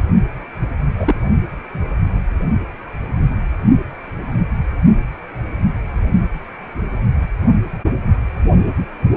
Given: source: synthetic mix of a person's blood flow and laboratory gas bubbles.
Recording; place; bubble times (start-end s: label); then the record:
Doppler ultrasound of blood flow; precordium
0.97-1.15 s: bubbles
From the record:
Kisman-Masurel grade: 113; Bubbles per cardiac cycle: 1 to 2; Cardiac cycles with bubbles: 1 to 10%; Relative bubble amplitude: loud (0.450 to 0.775); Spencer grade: 1 (occasional bubble signal discernible with the cardiac motion signal, with majority of cardiac periods free of bubbles); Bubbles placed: only in the low amplitude regions of the cardiac cycle